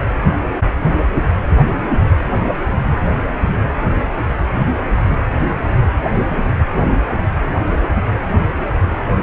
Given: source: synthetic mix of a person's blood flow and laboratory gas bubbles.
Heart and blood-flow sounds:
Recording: Doppler ultrasound of blood flow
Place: precordium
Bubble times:
no bubbles
From the record:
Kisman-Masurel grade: 000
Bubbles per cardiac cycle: 0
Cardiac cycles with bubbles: 0%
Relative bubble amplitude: no bubbles discernible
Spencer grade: 0 (complete lack of bubble signals)

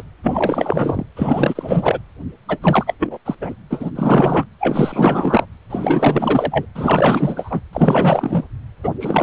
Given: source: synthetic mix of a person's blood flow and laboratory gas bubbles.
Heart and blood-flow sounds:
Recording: Doppler ultrasound of blood flow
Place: precordium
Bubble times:
0.00-0.03 s: bubbles
0.23-1.06 s: bubbles
1.16-1.99 s: bubbles
2.48-2.58 s: bubbles
2.62-2.94 s: bubbles
2.99-3.18 s: bubbles
3.25-3.35 s: bubbles
3.41-3.55 s: bubbles
3.70-3.91 s: bubbles
3.95-4.46 s: bubbles
4.59-5.46 s: bubbles
5.69-6.65 s: bubbles
6.75-7.61 s: bubbles
7.73-8.44 s: bubbles
8.83-8.94 s: bubbles
9.00-9.23 s: bubbles
From the record:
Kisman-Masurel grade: 444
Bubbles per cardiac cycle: continuous sound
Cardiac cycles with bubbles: 100%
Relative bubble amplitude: maximal (0.775 to 0.999)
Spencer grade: 4 (maximum detectable bubble signal sounding continuously throughout systole and diastole of every cardiac period, and overriding the amplitude of the normal cardiac signals)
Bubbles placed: anywhere in the cardiac cycle

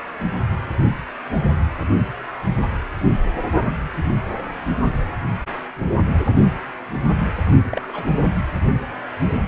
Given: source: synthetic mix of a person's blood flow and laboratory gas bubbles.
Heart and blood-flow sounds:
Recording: Doppler ultrasound of blood flow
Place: precordium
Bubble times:
7.67-8.05 s: bubbles
8.08-8.11 s: bubbles
From the record:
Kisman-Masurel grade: 111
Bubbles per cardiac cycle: 1 to 2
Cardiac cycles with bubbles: 1 to 10%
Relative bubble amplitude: barely perceptible (0.100 to 0.250)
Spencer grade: 1 (occasional bubble signal discernible with the cardiac motion signal, with majority of cardiac periods free of bubbles)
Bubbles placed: anywhere in the cardiac cycle

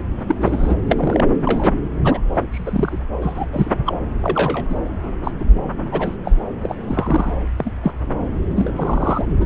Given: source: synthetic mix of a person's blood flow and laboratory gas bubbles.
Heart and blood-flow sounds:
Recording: Doppler ultrasound of blood flow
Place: subclavian vein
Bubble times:
0.28-0.36 s: bubbles
0.41-0.76 s: bubbles
0.90-1.25 s: bubbles
1.45-1.74 s: bubbles
2.04-2.21 s: bubbles
2.34-2.43 s: bubbles
2.52-2.98 s: bubbles
3.21-3.45 s: bubbles
3.52-3.71 s: bubbles
3.86-3.97 s: bubbles
4.22-4.65 s: bubbles
4.69-4.79 s: bubbles
5.24-5.31 s: bubbles
5.39-5.45 s: bubbles
5.92-6.17 s: bubbles
6.25-6.32 s: bubbles
6.63-6.75 s: bubbles
6.88-7.34 s: bubbles
7.57-7.71 s: bubbles
7.82-7.93 s: bubbles
8.55-8.72 s: bubbles
8.76-9.26 s: bubbles
9.40-9.46 s: bubbles
From the record:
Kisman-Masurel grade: 242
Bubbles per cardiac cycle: several, 3 to 8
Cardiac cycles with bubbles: 100%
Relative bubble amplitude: moderate (0.250 to 0.450)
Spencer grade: 3 (all of the cardiac periods contain showers or single bubble signals, but not dominating or overriding the cardiac motion signals)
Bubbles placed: anywhere in the cardiac cycle

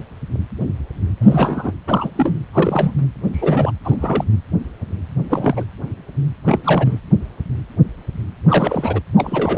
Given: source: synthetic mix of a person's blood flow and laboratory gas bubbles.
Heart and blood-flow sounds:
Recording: Doppler ultrasound of blood flow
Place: precordium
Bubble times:
1.21-1.72 s: bubbles
1.86-2.09 s: bubbles
2.15-2.34 s: bubbles
2.53-2.94 s: bubbles
2.97-3.05 s: bubbles
3.33-3.71 s: bubbles
3.84-4.25 s: bubbles
5.29-5.65 s: bubbles
6.44-6.60 s: bubbles
6.63-6.99 s: bubbles
8.48-9.00 s: bubbles
9.16-9.58 s: bubbles
From the record:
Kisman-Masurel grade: 332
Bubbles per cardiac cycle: rolling drumbeat, 9 or more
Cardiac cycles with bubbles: 50 to 99%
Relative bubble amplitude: moderate (0.250 to 0.450)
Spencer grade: 3 (all of the cardiac periods contain showers or single bubble signals, but not dominating or overriding the cardiac motion signals)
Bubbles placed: anywhere in the cardiac cycle

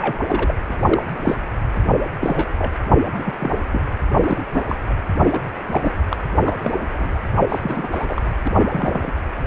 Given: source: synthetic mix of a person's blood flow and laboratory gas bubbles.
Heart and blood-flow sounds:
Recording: Doppler ultrasound of blood flow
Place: precordium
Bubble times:
0.00-0.21 s: bubbles
0.27-0.54 s: bubbles
0.69-0.76 s: bubbles
0.81-1.36 s: bubbles
2.20-2.48 s: bubbles
2.58-2.72 s: bubbles
3.17-3.33 s: bubbles
3.40-3.51 s: bubbles
3.72-3.81 s: bubbles
4.13-4.44 s: bubbles
4.53-4.64 s: bubbles
4.68-4.77 s: bubbles
5.25-5.40 s: bubbles
5.58-5.95 s: bubbles
6.09-6.17 s: bubbles
6.38-6.55 s: bubbles
6.61-6.74 s: bubbles
7.00-7.12 s: bubbles
7.48-7.58 s: bubbles
7.62-7.90 s: bubbles
7.92-8.06 s: bubbles
8.09-8.21 s: bubbles
8.44-8.52 s: bubbles
8.71-9.13 s: bubbles
9.45-9.47 s: bubbles
From the record:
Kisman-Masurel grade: 242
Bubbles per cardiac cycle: several, 3 to 8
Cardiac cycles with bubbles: 100%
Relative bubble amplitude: moderate (0.250 to 0.450)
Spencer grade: 3 (all of the cardiac periods contain showers or single bubble signals, but not dominating or overriding the cardiac motion signals)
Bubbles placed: anywhere in the cardiac cycle

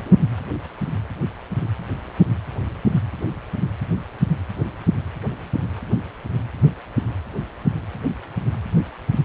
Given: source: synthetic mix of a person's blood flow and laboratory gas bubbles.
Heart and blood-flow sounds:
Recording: Doppler ultrasound of blood flow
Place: precordium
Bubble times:
0.02-0.17 s: bubbles
From the record:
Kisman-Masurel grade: 111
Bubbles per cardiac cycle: 1 to 2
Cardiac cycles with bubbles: 1 to 10%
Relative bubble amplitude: barely perceptible (0.100 to 0.250)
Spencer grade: 1 (occasional bubble signal discernible with the cardiac motion signal, with majority of cardiac periods free of bubbles)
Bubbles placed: anywhere in the cardiac cycle

